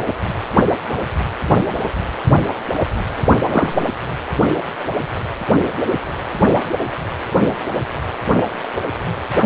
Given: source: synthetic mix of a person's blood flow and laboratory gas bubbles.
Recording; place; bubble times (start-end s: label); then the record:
Doppler ultrasound of blood flow; precordium
3.51-3.74 s: bubbles
From the record:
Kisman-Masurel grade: 113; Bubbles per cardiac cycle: 1 to 2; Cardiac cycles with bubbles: 1 to 10%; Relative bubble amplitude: loud (0.450 to 0.775); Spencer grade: 1 (occasional bubble signal discernible with the cardiac motion signal, with majority of cardiac periods free of bubbles); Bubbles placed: anywhere in the cardiac cycle